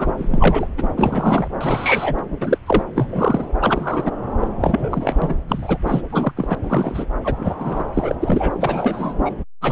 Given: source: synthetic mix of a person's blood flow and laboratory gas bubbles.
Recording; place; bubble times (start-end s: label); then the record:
Doppler ultrasound of blood flow; subclavian vein
0.00-0.12 s: bubbles
0.18-0.67 s: bubbles
0.77-0.88 s: bubbles
0.95-1.48 s: bubbles
1.60-2.22 s: bubbles
2.41-2.58 s: bubbles
2.66-2.83 s: bubbles
2.95-3.52 s: bubbles
3.60-4.11 s: bubbles
4.40-4.47 s: bubbles
4.61-5.17 s: bubbles
5.21-5.41 s: bubbles
5.48-5.78 s: bubbles
5.86-6.02 s: bubbles
6.10-6.32 s: bubbles
6.36-6.55 s: bubbles
6.63-7.06 s: bubbles
7.23-7.53 s: bubbles
7.58-7.83 s: bubbles
7.94-8.15 s: bubbles
8.20-8.51 s: bubbles
8.60-9.14 s: bubbles
9.25-9.34 s: bubbles
9.61-9.72 s: bubbles
From the record:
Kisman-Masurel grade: 243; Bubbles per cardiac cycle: several, 3 to 8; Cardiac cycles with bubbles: 100%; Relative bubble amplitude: loud (0.450 to 0.775); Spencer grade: 3 (all of the cardiac periods contain showers or single bubble signals, but not dominating or overriding the cardiac motion signals); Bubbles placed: anywhere in the cardiac cycle